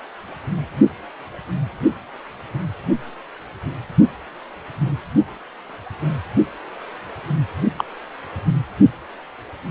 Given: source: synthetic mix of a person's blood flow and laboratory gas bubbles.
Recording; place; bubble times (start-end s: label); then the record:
Doppler ultrasound of blood flow; precordium
7.78-7.85 s: bubbles
From the record:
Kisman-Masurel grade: 113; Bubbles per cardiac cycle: 1 to 2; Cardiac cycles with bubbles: 1 to 10%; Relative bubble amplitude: loud (0.450 to 0.775); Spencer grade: 1 (occasional bubble signal discernible with the cardiac motion signal, with majority of cardiac periods free of bubbles); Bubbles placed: anywhere in the cardiac cycle